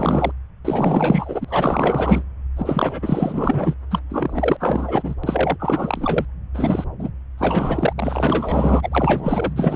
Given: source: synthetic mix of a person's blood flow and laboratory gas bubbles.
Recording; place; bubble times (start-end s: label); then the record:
Doppler ultrasound of blood flow; subclavian vein
0.00-0.33 s: bubbles
0.65-2.23 s: bubbles
2.56-3.74 s: bubbles
3.90-4.02 s: bubbles
4.09-4.57 s: bubbles
4.60-5.15 s: bubbles
5.24-5.57 s: bubbles
5.59-6.25 s: bubbles
6.54-6.84 s: bubbles
6.99-7.10 s: bubbles
7.38-7.93 s: bubbles
7.97-9.53 s: bubbles
9.56-9.76 s: bubbles
From the record:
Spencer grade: 4 (maximum detectable bubble signal sounding continuously throughout systole and diastole of every cardiac period, and overriding the amplitude of the normal cardiac signals); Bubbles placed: anywhere in the cardiac cycle